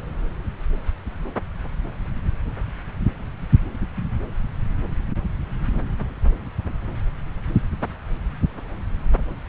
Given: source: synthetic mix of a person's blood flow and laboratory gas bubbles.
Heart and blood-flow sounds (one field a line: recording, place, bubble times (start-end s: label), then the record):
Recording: Doppler ultrasound of blood flow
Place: subclavian vein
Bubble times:
no bubbles
From the record:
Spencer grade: 0 (complete lack of bubble signals)